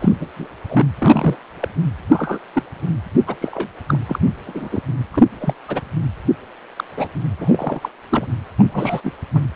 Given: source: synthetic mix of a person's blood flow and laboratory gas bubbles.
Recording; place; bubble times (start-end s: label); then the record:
Doppler ultrasound of blood flow; precordium
0.00-0.09 s: bubbles
0.21-0.27 s: bubbles
0.37-0.47 s: bubbles
0.69-0.85 s: bubbles
0.99-1.36 s: bubbles
1.60-1.69 s: bubbles
2.10-2.40 s: bubbles
2.54-2.63 s: bubbles
3.27-3.35 s: bubbles
3.41-3.69 s: bubbles
3.88-3.98 s: bubbles
4.08-4.19 s: bubbles
4.46-4.82 s: bubbles
5.11-5.25 s: bubbles
5.40-5.54 s: bubbles
5.67-5.80 s: bubbles
6.76-6.84 s: bubbles
6.96-7.08 s: bubbles
7.38-7.89 s: bubbles
8.11-8.28 s: bubbles
8.58-9.01 s: bubbles
9.04-9.12 s: bubbles
9.34-9.41 s: bubbles
From the record:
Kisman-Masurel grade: 242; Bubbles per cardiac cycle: several, 3 to 8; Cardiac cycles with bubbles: 100%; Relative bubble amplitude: moderate (0.250 to 0.450); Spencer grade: 3 (all of the cardiac periods contain showers or single bubble signals, but not dominating or overriding the cardiac motion signals); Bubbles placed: anywhere in the cardiac cycle